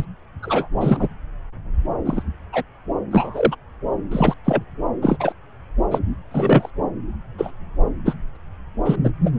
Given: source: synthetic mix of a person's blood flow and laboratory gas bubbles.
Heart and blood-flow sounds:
Doppler ultrasound of blood flow; subclavian vein
0.00-0.05 s: bubbles
0.42-0.68 s: bubbles
0.81-1.08 s: bubbles
2.05-2.23 s: bubbles
2.52-2.62 s: bubbles
3.11-3.55 s: bubbles
4.11-4.34 s: bubbles
4.45-4.63 s: bubbles
5.01-5.17 s: bubbles
5.20-5.33 s: bubbles
5.91-6.00 s: bubbles
6.30-6.71 s: bubbles
7.38-7.54 s: bubbles
8.05-8.14 s: bubbles
8.35-8.37 s: bubbles
8.85-8.96 s: bubbles
9.04-9.11 s: bubbles
9.25-9.30 s: bubbles
From the record:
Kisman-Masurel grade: 243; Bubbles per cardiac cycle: several, 3 to 8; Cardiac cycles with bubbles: 100%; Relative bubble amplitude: loud (0.450 to 0.775); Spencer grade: 3 (all of the cardiac periods contain showers or single bubble signals, but not dominating or overriding the cardiac motion signals); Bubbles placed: anywhere in the cardiac cycle

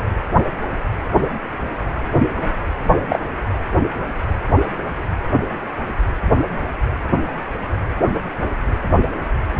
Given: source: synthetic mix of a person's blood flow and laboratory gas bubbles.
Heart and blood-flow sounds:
Doppler ultrasound of blood flow; precordium
3.09-3.19 s: bubbles
From the record:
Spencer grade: 1 (occasional bubble signal discernible with the cardiac motion signal, with majority of cardiac periods free of bubbles); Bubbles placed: anywhere in the cardiac cycle

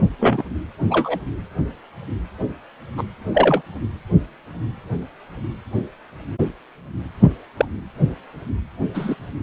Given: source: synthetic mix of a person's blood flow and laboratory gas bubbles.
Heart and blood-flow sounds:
Doppler ultrasound of blood flow; precordium
0.19-0.43 s: bubbles
0.89-1.19 s: bubbles
2.97-3.04 s: bubbles
3.34-3.62 s: bubbles
7.57-7.66 s: bubbles
8.94-9.14 s: bubbles
From the record:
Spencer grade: 2 (many but less than half of the cardiac periods contain bubble signals, singularly or in groups); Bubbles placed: anywhere in the cardiac cycle

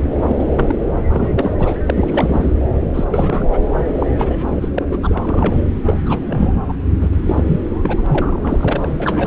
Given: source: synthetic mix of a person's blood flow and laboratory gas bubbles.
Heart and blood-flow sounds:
Doppler ultrasound of blood flow; subclavian vein
0.20-0.76 s: bubbles
0.80-0.85 s: bubbles
1.03-1.55 s: bubbles
1.58-1.77 s: bubbles
1.87-2.52 s: bubbles
2.94-3.58 s: bubbles
3.90-4.07 s: bubbles
4.15-4.69 s: bubbles
4.74-4.83 s: bubbles
4.92-5.62 s: bubbles
5.85-5.95 s: bubbles
6.06-6.57 s: bubbles
6.68-6.74 s: bubbles
7.01-7.08 s: bubbles
7.12-7.17 s: bubbles
7.26-7.43 s: bubbles
7.46-7.61 s: bubbles
7.84-9.27 s: bubbles
From the record:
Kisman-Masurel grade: 342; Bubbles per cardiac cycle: rolling drumbeat, 9 or more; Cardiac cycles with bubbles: 100%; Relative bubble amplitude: moderate (0.250 to 0.450); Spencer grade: 3 (all of the cardiac periods contain showers or single bubble signals, but not dominating or overriding the cardiac motion signals); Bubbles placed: anywhere in the cardiac cycle

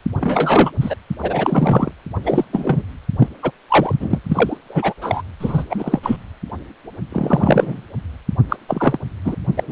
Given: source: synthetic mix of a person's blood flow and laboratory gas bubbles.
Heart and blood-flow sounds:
Doppler ultrasound of blood flow; precordium
0.20-0.71 s: bubbles
0.80-0.96 s: bubbles
1.22-1.91 s: bubbles
2.24-2.45 s: bubbles
2.53-2.83 s: bubbles
3.19-3.29 s: bubbles
3.42-3.51 s: bubbles
3.68-3.95 s: bubbles
4.00-4.20 s: bubbles
4.30-4.57 s: bubbles
4.69-4.94 s: bubbles
5.01-5.21 s: bubbles
5.40-5.63 s: bubbles
5.70-6.00 s: bubbles
6.03-6.17 s: bubbles
7.12-7.81 s: bubbles
8.49-8.56 s: bubbles
8.68-8.99 s: bubbles
9.25-9.35 s: bubbles
9.56-9.63 s: bubbles
9.67-9.72 s: bubbles
From the record:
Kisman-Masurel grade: 233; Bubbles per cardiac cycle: several, 3 to 8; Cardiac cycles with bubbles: 50 to 99%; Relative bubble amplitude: loud (0.450 to 0.775); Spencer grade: 3 (all of the cardiac periods contain showers or single bubble signals, but not dominating or overriding the cardiac motion signals); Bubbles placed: anywhere in the cardiac cycle

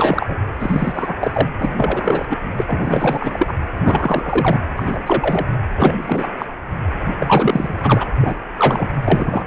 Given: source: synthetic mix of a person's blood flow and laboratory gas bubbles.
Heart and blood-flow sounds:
Doppler ultrasound of blood flow; precordium
0.00-0.38 s: bubbles
0.59-1.15 s: bubbles
1.20-1.48 s: bubbles
1.59-2.27 s: bubbles
2.29-2.38 s: bubbles
2.57-3.54 s: bubbles
3.83-4.60 s: bubbles
4.76-4.99 s: bubbles
5.06-5.46 s: bubbles
5.76-6.34 s: bubbles
6.38-6.46 s: bubbles
7.18-8.05 s: bubbles
8.16-8.39 s: bubbles
8.57-8.89 s: bubbles
9.04-9.44 s: bubbles
From the record:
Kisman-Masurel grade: 343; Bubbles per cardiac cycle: rolling drumbeat, 9 or more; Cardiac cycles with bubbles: 100%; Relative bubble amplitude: loud (0.450 to 0.775); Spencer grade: 3 (all of the cardiac periods contain showers or single bubble signals, but not dominating or overriding the cardiac motion signals); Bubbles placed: anywhere in the cardiac cycle

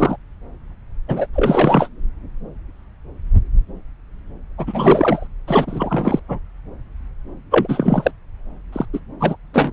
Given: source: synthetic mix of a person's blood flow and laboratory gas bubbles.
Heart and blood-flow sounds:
Doppler ultrasound of blood flow; subclavian vein
0.00-0.16 s: bubbles
1.08-1.26 s: bubbles
1.33-1.89 s: bubbles
4.58-5.28 s: bubbles
5.47-6.20 s: bubbles
6.28-6.39 s: bubbles
7.51-8.11 s: bubbles
8.72-8.86 s: bubbles
8.93-8.99 s: bubbles
9.20-9.36 s: bubbles
9.53-9.71 s: bubbles
From the record:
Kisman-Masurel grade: 333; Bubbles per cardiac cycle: rolling drumbeat, 9 or more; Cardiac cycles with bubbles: 50 to 99%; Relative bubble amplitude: loud (0.450 to 0.775); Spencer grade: 3 (all of the cardiac periods contain showers or single bubble signals, but not dominating or overriding the cardiac motion signals); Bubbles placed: anywhere in the cardiac cycle

